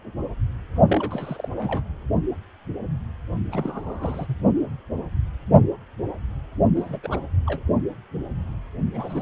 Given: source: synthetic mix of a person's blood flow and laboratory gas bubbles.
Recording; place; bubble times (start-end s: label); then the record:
Doppler ultrasound of blood flow; precordium
0.88-1.48 s: bubbles
1.56-1.83 s: bubbles
3.52-4.38 s: bubbles
6.76-6.99 s: bubbles
7.03-7.20 s: bubbles
7.46-7.63 s: bubbles
8.93-9.22 s: bubbles
From the record:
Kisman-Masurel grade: 221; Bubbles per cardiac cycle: several, 3 to 8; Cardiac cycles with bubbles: 10 to 50%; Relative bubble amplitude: barely perceptible (0.100 to 0.250); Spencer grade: 2 (many but less than half of the cardiac periods contain bubble signals, singularly or in groups); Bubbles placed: only in the low amplitude regions of the cardiac cycle